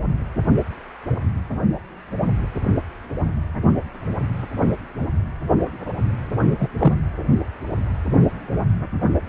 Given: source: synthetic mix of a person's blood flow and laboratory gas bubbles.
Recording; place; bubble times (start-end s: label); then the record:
Doppler ultrasound of blood flow; precordium
6.58-6.70 s: bubbles
6.79-6.93 s: bubbles
From the record:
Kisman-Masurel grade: 112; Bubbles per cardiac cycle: 1 to 2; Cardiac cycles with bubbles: 1 to 10%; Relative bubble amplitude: moderate (0.250 to 0.450); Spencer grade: 1 (occasional bubble signal discernible with the cardiac motion signal, with majority of cardiac periods free of bubbles); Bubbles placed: anywhere in the cardiac cycle